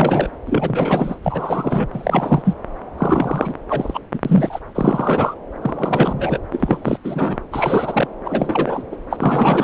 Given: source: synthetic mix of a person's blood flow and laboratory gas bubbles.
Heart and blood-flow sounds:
Doppler ultrasound of blood flow; subclavian vein
0.00-0.31 s: bubbles
0.46-1.15 s: bubbles
1.23-1.87 s: bubbles
1.93-2.55 s: bubbles
2.98-3.53 s: bubbles
3.69-3.99 s: bubbles
4.13-4.20 s: bubbles
4.25-4.59 s: bubbles
4.75-5.34 s: bubbles
5.62-6.38 s: bubbles
6.52-6.98 s: bubbles
7.04-7.38 s: bubbles
7.52-8.07 s: bubbles
8.24-8.83 s: bubbles
8.91-8.96 s: bubbles
9.10-9.64 s: bubbles
From the record:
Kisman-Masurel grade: 342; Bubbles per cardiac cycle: rolling drumbeat, 9 or more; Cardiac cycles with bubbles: 100%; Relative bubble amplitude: moderate (0.250 to 0.450); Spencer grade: 3 (all of the cardiac periods contain showers or single bubble signals, but not dominating or overriding the cardiac motion signals); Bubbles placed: anywhere in the cardiac cycle

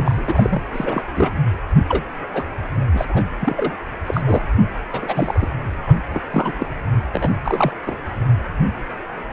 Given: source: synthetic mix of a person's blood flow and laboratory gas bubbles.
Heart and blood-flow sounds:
Doppler ultrasound of blood flow; precordium
0.00-0.62 s: bubbles
0.73-1.04 s: bubbles
1.17-1.31 s: bubbles
1.75-1.84 s: bubbles
1.89-2.04 s: bubbles
2.33-2.45 s: bubbles
2.94-3.05 s: bubbles
3.08-3.25 s: bubbles
3.40-3.76 s: bubbles
4.06-4.21 s: bubbles
4.24-4.41 s: bubbles
4.94-5.48 s: bubbles
5.87-6.00 s: bubbles
6.11-6.22 s: bubbles
6.30-6.53 s: bubbles
6.60-6.66 s: bubbles
7.13-7.30 s: bubbles
7.44-7.72 s: bubbles
7.86-7.98 s: bubbles
9.30-9.33 s: bubbles
From the record:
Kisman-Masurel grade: 242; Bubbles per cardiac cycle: several, 3 to 8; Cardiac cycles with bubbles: 100%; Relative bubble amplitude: moderate (0.250 to 0.450); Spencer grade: 3 (all of the cardiac periods contain showers or single bubble signals, but not dominating or overriding the cardiac motion signals); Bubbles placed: anywhere in the cardiac cycle

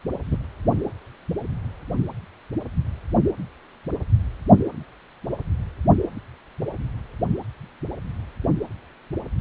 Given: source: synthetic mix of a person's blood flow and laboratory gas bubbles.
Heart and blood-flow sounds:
Doppler ultrasound of blood flow; precordium
0.31-0.37 s: bubbles
From the record:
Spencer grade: 1 (occasional bubble signal discernible with the cardiac motion signal, with majority of cardiac periods free of bubbles); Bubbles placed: anywhere in the cardiac cycle

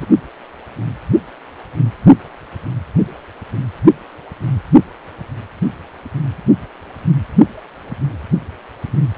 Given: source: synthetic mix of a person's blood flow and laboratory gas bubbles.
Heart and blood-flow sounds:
Doppler ultrasound of blood flow; precordium
0.00-0.06 s: bubbles
From the record:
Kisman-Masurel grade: 111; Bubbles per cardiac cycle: 1 to 2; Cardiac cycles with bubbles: 1 to 10%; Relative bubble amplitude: barely perceptible (0.100 to 0.250); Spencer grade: 1 (occasional bubble signal discernible with the cardiac motion signal, with majority of cardiac periods free of bubbles); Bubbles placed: only in the low amplitude regions of the cardiac cycle

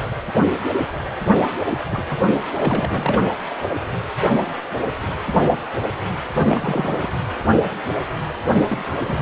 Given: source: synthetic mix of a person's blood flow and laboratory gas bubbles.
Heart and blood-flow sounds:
Doppler ultrasound of blood flow; precordium
1.70-1.78 s: bubbles
1.92-2.03 s: bubbles
2.06-2.35 s: bubbles
2.57-3.21 s: bubbles
6.34-7.09 s: bubbles
8.48-8.64 s: bubbles
8.68-8.94 s: bubbles
9.04-9.22 s: bubbles
From the record:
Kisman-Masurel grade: 221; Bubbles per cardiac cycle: several, 3 to 8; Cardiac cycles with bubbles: 10 to 50%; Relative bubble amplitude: barely perceptible (0.100 to 0.250); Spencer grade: 2 (many but less than half of the cardiac periods contain bubble signals, singularly or in groups); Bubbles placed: anywhere in the cardiac cycle

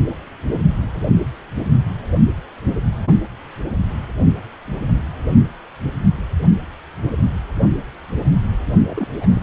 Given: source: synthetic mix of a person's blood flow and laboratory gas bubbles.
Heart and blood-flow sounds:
Doppler ultrasound of blood flow; precordium
8.84-9.07 s: bubbles
9.21-9.43 s: bubbles
From the record:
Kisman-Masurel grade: 211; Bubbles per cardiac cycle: several, 3 to 8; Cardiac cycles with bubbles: 1 to 10%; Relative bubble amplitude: barely perceptible (0.100 to 0.250); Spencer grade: 1 (occasional bubble signal discernible with the cardiac motion signal, with majority of cardiac periods free of bubbles); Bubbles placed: only in the low amplitude regions of the cardiac cycle

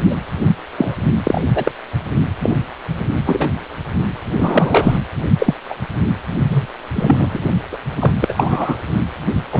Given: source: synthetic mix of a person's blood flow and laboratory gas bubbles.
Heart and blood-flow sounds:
Doppler ultrasound of blood flow; precordium
0.00-0.17 s: bubbles
0.78-0.95 s: bubbles
1.23-1.41 s: bubbles
1.55-1.73 s: bubbles
2.41-2.51 s: bubbles
3.27-3.48 s: bubbles
4.36-4.97 s: bubbles
5.39-5.54 s: bubbles
5.68-5.75 s: bubbles
6.49-6.67 s: bubbles
6.95-7.44 s: bubbles
7.71-7.77 s: bubbles
7.99-8.12 s: bubbles
8.20-8.33 s: bubbles
8.36-8.78 s: bubbles
9.51-9.60 s: bubbles
From the record:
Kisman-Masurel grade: 243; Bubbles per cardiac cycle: several, 3 to 8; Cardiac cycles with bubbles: 100%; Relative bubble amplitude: loud (0.450 to 0.775); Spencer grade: 3 (all of the cardiac periods contain showers or single bubble signals, but not dominating or overriding the cardiac motion signals); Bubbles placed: only in the low amplitude regions of the cardiac cycle

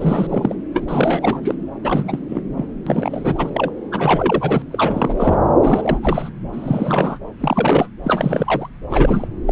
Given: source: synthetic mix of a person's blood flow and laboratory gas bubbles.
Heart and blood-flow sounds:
Doppler ultrasound of blood flow; subclavian vein
0.00-0.55 s: bubbles
0.74-0.85 s: bubbles
0.88-1.54 s: bubbles
1.83-2.19 s: bubbles
2.28-2.43 s: bubbles
2.56-2.67 s: bubbles
2.86-3.51 s: bubbles
3.54-3.71 s: bubbles
3.91-4.62 s: bubbles
4.71-5.39 s: bubbles
5.61-6.30 s: bubbles
6.53-7.19 s: bubbles
7.40-7.89 s: bubbles
8.04-8.69 s: bubbles
8.89-9.27 s: bubbles
9.47-9.52 s: bubbles
From the record:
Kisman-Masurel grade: 342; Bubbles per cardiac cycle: rolling drumbeat, 9 or more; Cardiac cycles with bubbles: 100%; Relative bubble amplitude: moderate (0.250 to 0.450); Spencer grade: 3 (all of the cardiac periods contain showers or single bubble signals, but not dominating or overriding the cardiac motion signals); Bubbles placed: anywhere in the cardiac cycle

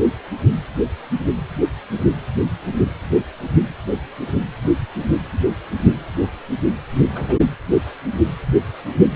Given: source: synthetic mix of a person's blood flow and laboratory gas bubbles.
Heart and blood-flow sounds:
Doppler ultrasound of blood flow; precordium
7.11-7.38 s: bubbles
7.71-7.78 s: bubbles
From the record:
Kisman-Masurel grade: 111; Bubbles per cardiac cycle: 1 to 2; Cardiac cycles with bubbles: 1 to 10%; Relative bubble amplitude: barely perceptible (0.100 to 0.250); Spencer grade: 1 (occasional bubble signal discernible with the cardiac motion signal, with majority of cardiac periods free of bubbles); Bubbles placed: anywhere in the cardiac cycle

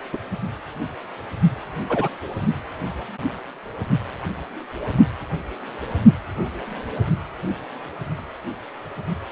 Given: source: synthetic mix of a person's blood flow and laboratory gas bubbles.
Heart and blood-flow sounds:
Doppler ultrasound of blood flow; precordium
0.12-0.17 s: bubbles
1.89-2.08 s: bubbles
From the record:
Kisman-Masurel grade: 122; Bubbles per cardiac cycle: 1 to 2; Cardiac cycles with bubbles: 10 to 50%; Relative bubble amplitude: moderate (0.250 to 0.450); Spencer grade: 2 (many but less than half of the cardiac periods contain bubble signals, singularly or in groups); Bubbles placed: only in the low amplitude regions of the cardiac cycle

